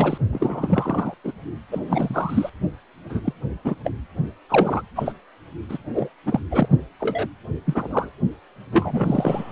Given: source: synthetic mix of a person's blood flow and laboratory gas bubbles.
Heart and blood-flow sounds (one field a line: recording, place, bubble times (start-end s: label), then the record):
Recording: Doppler ultrasound of blood flow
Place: precordium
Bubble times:
0.00-0.18 s: bubbles
0.30-1.14 s: bubbles
1.24-1.32 s: bubbles
1.71-2.50 s: bubbles
3.10-3.21 s: bubbles
3.25-3.33 s: bubbles
3.65-3.74 s: bubbles
3.84-3.90 s: bubbles
4.49-4.82 s: bubbles
4.95-5.13 s: bubbles
5.69-5.77 s: bubbles
5.94-6.09 s: bubbles
6.25-6.40 s: bubbles
6.51-6.68 s: bubbles
7.00-7.27 s: bubbles
7.66-8.12 s: bubbles
8.72-9.52 s: bubbles
From the record:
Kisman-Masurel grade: 242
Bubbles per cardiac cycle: several, 3 to 8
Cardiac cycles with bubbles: 100%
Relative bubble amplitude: moderate (0.250 to 0.450)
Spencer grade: 3 (all of the cardiac periods contain showers or single bubble signals, but not dominating or overriding the cardiac motion signals)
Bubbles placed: only in the low amplitude regions of the cardiac cycle